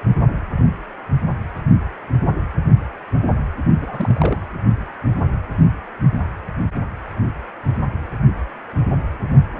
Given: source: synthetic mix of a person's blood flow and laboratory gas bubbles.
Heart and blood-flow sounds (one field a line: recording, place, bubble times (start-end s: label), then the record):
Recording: Doppler ultrasound of blood flow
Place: precordium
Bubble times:
3.81-4.38 s: bubbles
From the record:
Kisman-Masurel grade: 211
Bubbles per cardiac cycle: several, 3 to 8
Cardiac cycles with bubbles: 1 to 10%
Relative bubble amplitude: barely perceptible (0.100 to 0.250)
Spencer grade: 1 (occasional bubble signal discernible with the cardiac motion signal, with majority of cardiac periods free of bubbles)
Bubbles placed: anywhere in the cardiac cycle